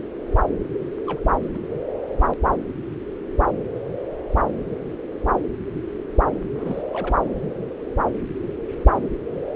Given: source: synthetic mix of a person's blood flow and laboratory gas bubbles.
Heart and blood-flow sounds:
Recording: Doppler ultrasound of blood flow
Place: subclavian vein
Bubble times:
0.74-0.78 s: bubbles
1.06-1.20 s: bubbles
1.54-1.59 s: bubbles
6.55-6.82 s: bubbles
6.93-7.16 s: bubbles
From the record:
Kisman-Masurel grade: 221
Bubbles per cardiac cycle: several, 3 to 8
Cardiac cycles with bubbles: 10 to 50%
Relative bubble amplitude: barely perceptible (0.100 to 0.250)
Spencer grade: 2 (many but less than half of the cardiac periods contain bubble signals, singularly or in groups)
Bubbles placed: anywhere in the cardiac cycle

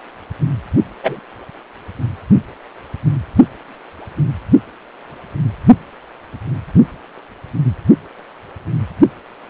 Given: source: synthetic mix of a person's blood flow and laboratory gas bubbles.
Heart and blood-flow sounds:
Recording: Doppler ultrasound of blood flow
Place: precordium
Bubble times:
1.03-1.20 s: bubbles
From the record:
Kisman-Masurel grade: 113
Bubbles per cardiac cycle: 1 to 2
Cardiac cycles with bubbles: 1 to 10%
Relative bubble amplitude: loud (0.450 to 0.775)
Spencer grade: 1 (occasional bubble signal discernible with the cardiac motion signal, with majority of cardiac periods free of bubbles)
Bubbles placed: only in the low amplitude regions of the cardiac cycle

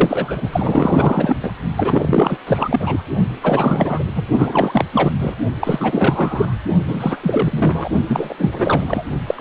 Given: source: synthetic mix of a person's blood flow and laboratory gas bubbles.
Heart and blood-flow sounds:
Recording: Doppler ultrasound of blood flow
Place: precordium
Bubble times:
0.00-0.49 s: bubbles
0.52-1.37 s: bubbles
1.42-1.52 s: bubbles
1.77-2.38 s: bubbles
2.46-3.02 s: bubbles
3.40-4.05 s: bubbles
4.15-4.27 s: bubbles
4.38-4.85 s: bubbles
4.92-5.12 s: bubbles
5.18-5.35 s: bubbles
5.61-6.55 s: bubbles
6.88-7.18 s: bubbles
7.22-7.89 s: bubbles
8.08-8.35 s: bubbles
8.38-9.04 s: bubbles
9.27-9.41 s: bubbles
From the record:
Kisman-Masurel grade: 444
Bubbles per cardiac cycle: continuous sound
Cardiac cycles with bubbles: 100%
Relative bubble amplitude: maximal (0.775 to 0.999)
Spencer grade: 4 (maximum detectable bubble signal sounding continuously throughout systole and diastole of every cardiac period, and overriding the amplitude of the normal cardiac signals)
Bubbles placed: only in the low amplitude regions of the cardiac cycle

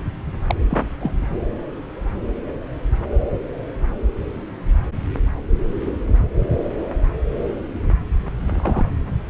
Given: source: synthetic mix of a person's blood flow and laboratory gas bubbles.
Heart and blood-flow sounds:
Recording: Doppler ultrasound of blood flow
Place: subclavian vein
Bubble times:
0.46-0.55 s: bubbles
0.70-0.87 s: bubbles
1.01-1.12 s: bubbles
1.16-1.43 s: bubbles
8.50-8.89 s: bubbles
From the record:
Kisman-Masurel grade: 222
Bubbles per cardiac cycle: several, 3 to 8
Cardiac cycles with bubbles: 10 to 50%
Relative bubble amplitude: moderate (0.250 to 0.450)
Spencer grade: 2 (many but less than half of the cardiac periods contain bubble signals, singularly or in groups)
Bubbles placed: anywhere in the cardiac cycle

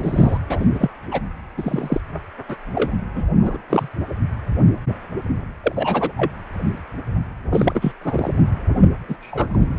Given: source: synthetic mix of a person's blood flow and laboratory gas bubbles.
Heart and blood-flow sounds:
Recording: Doppler ultrasound of blood flow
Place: precordium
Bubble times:
0.00-0.38 s: bubbles
0.50-0.66 s: bubbles
0.73-0.88 s: bubbles
1.11-1.21 s: bubbles
1.57-2.00 s: bubbles
2.49-2.56 s: bubbles
2.75-2.93 s: bubbles
3.15-3.24 s: bubbles
3.35-3.58 s: bubbles
3.70-3.88 s: bubbles
5.63-6.12 s: bubbles
6.17-6.32 s: bubbles
7.50-7.92 s: bubbles
8.02-8.31 s: bubbles
9.08-9.16 s: bubbles
9.21-9.74 s: bubbles
From the record:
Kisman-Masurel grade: 232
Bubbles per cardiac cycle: several, 3 to 8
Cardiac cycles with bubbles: 50 to 99%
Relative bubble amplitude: moderate (0.250 to 0.450)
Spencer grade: 3 (all of the cardiac periods contain showers or single bubble signals, but not dominating or overriding the cardiac motion signals)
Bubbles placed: anywhere in the cardiac cycle

